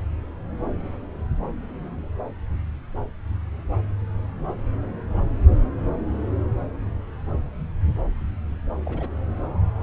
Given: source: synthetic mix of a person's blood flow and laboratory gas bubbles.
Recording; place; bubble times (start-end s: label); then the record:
Doppler ultrasound of blood flow; subclavian vein
8.85-9.08 s: bubbles
From the record:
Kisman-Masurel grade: 211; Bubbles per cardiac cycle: several, 3 to 8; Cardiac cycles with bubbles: 1 to 10%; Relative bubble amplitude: barely perceptible (0.100 to 0.250); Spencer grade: 1 (occasional bubble signal discernible with the cardiac motion signal, with majority of cardiac periods free of bubbles); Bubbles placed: anywhere in the cardiac cycle